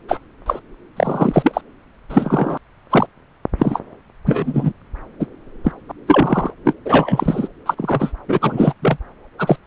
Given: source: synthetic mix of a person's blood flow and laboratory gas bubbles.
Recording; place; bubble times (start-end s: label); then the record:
Doppler ultrasound of blood flow; subclavian vein
0.08-0.20 s: bubbles
0.46-0.59 s: bubbles
0.97-1.61 s: bubbles
2.09-2.58 s: bubbles
2.89-3.07 s: bubbles
3.58-3.80 s: bubbles
4.25-4.72 s: bubbles
5.19-5.26 s: bubbles
5.63-5.72 s: bubbles
5.88-5.92 s: bubbles
6.07-6.50 s: bubbles
6.64-6.74 s: bubbles
6.85-7.48 s: bubbles
7.65-7.75 s: bubbles
7.77-8.12 s: bubbles
8.28-8.73 s: bubbles
8.82-8.97 s: bubbles
9.38-9.57 s: bubbles
From the record:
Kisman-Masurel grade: 243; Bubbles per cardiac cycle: several, 3 to 8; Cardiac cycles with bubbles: 100%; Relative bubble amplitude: loud (0.450 to 0.775); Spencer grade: 3 (all of the cardiac periods contain showers or single bubble signals, but not dominating or overriding the cardiac motion signals); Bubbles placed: anywhere in the cardiac cycle